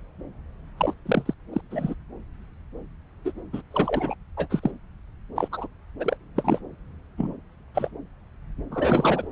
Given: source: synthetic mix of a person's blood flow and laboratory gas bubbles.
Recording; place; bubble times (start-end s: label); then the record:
Doppler ultrasound of blood flow; subclavian vein
0.78-0.93 s: bubbles
1.06-1.33 s: bubbles
1.53-1.61 s: bubbles
1.71-1.94 s: bubbles
3.25-3.32 s: bubbles
3.53-3.61 s: bubbles
3.71-4.14 s: bubbles
4.37-4.47 s: bubbles
4.50-4.59 s: bubbles
4.62-4.71 s: bubbles
5.36-5.48 s: bubbles
5.51-5.67 s: bubbles
6.00-6.17 s: bubbles
6.35-6.58 s: bubbles
7.17-7.35 s: bubbles
7.75-7.91 s: bubbles
8.71-9.26 s: bubbles
From the record:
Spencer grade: 3 (all of the cardiac periods contain showers or single bubble signals, but not dominating or overriding the cardiac motion signals); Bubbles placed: anywhere in the cardiac cycle